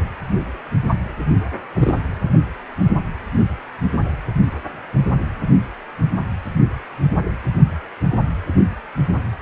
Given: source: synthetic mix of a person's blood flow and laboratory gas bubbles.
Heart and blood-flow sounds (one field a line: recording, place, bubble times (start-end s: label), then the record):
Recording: Doppler ultrasound of blood flow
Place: precordium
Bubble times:
1.73-1.97 s: bubbles
From the record:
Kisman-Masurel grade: 222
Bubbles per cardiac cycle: several, 3 to 8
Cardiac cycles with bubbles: 10 to 50%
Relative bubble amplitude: moderate (0.250 to 0.450)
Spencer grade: 2 (many but less than half of the cardiac periods contain bubble signals, singularly or in groups)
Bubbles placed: only in the low amplitude regions of the cardiac cycle